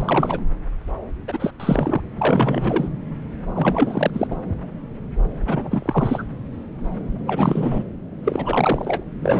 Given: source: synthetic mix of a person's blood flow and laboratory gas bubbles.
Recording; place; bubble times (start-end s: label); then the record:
Doppler ultrasound of blood flow; subclavian vein
0.00-0.39 s: bubbles
1.27-1.50 s: bubbles
1.59-2.01 s: bubbles
2.18-2.89 s: bubbles
3.54-4.10 s: bubbles
4.13-4.27 s: bubbles
4.30-4.36 s: bubbles
5.41-6.23 s: bubbles
7.25-7.83 s: bubbles
8.24-9.04 s: bubbles
9.21-9.40 s: bubbles
From the record:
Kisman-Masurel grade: 332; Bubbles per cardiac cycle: rolling drumbeat, 9 or more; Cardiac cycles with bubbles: 50 to 99%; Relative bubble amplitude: moderate (0.250 to 0.450); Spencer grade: 3 (all of the cardiac periods contain showers or single bubble signals, but not dominating or overriding the cardiac motion signals); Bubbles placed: anywhere in the cardiac cycle